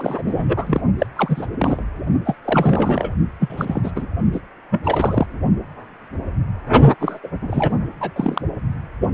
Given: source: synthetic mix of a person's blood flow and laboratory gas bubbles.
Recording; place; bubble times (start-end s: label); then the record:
Doppler ultrasound of blood flow; precordium
0.00-0.81 s: bubbles
0.98-1.06 s: bubbles
1.15-1.47 s: bubbles
1.59-1.83 s: bubbles
2.25-2.35 s: bubbles
2.45-3.11 s: bubbles
3.40-3.91 s: bubbles
3.96-4.07 s: bubbles
4.32-4.41 s: bubbles
4.71-4.80 s: bubbles
4.83-5.26 s: bubbles
7.00-7.18 s: bubbles
7.22-7.28 s: bubbles
7.42-7.78 s: bubbles
8.00-8.11 s: bubbles
8.16-8.42 s: bubbles
From the record:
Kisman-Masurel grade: 332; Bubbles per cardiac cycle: rolling drumbeat, 9 or more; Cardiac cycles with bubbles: 50 to 99%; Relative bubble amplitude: moderate (0.250 to 0.450); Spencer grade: 3 (all of the cardiac periods contain showers or single bubble signals, but not dominating or overriding the cardiac motion signals); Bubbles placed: only in the low amplitude regions of the cardiac cycle